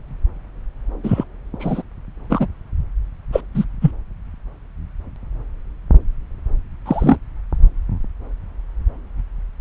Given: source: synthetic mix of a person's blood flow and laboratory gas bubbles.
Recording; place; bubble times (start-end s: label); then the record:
Doppler ultrasound of blood flow; subclavian vein
1.04-1.24 s: bubbles
1.59-1.82 s: bubbles
2.29-2.46 s: bubbles
3.32-3.42 s: bubbles
3.54-3.65 s: bubbles
3.81-3.91 s: bubbles
6.86-7.20 s: bubbles
From the record:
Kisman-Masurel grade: 123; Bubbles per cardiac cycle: 1 to 2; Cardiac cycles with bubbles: 10 to 50%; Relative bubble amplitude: loud (0.450 to 0.775); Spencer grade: 2 (many but less than half of the cardiac periods contain bubble signals, singularly or in groups); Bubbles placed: anywhere in the cardiac cycle